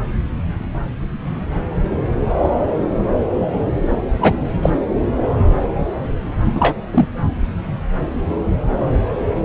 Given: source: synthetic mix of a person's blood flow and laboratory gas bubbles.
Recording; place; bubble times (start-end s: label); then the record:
Doppler ultrasound of blood flow; subclavian vein
4.21-4.34 s: bubbles
4.62-4.70 s: bubbles
6.54-6.74 s: bubbles
6.92-7.08 s: bubbles
From the record:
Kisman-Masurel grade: 223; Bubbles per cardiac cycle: several, 3 to 8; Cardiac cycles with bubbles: 10 to 50%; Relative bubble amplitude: loud (0.450 to 0.775); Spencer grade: 2 (many but less than half of the cardiac periods contain bubble signals, singularly or in groups); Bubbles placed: anywhere in the cardiac cycle